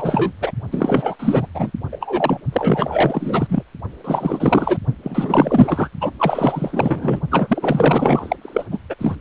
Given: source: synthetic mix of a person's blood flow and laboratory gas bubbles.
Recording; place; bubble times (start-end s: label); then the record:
Doppler ultrasound of blood flow; precordium
0.00-0.32 s: bubbles
0.40-0.51 s: bubbles
0.71-1.47 s: bubbles
1.54-1.71 s: bubbles
1.92-1.97 s: bubbles
2.00-2.41 s: bubbles
2.52-3.63 s: bubbles
4.04-4.78 s: bubbles
5.03-5.89 s: bubbles
6.01-6.11 s: bubbles
6.19-7.21 s: bubbles
7.30-8.37 s: bubbles
8.41-8.66 s: bubbles
8.71-8.79 s: bubbles
8.89-8.95 s: bubbles
8.98-9.15 s: bubbles
From the record:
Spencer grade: 4 (maximum detectable bubble signal sounding continuously throughout systole and diastole of every cardiac period, and overriding the amplitude of the normal cardiac signals); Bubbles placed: only in the low amplitude regions of the cardiac cycle